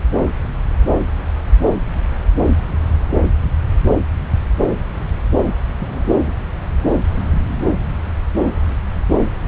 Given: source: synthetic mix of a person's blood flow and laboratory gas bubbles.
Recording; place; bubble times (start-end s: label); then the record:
Doppler ultrasound of blood flow; subclavian vein
5.79-6.20 s: bubbles
6.26-6.34 s: bubbles
From the record:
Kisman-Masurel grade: 111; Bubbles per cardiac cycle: 1 to 2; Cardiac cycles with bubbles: 1 to 10%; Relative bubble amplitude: barely perceptible (0.100 to 0.250); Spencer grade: 1 (occasional bubble signal discernible with the cardiac motion signal, with majority of cardiac periods free of bubbles); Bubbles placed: anywhere in the cardiac cycle